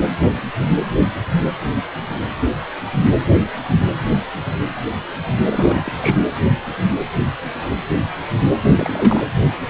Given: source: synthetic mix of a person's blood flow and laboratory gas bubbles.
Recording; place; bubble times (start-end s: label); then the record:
Doppler ultrasound of blood flow; precordium
5.51-6.18 s: bubbles
8.62-8.72 s: bubbles
8.77-9.30 s: bubbles
From the record:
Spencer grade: 2 (many but less than half of the cardiac periods contain bubble signals, singularly or in groups); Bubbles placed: anywhere in the cardiac cycle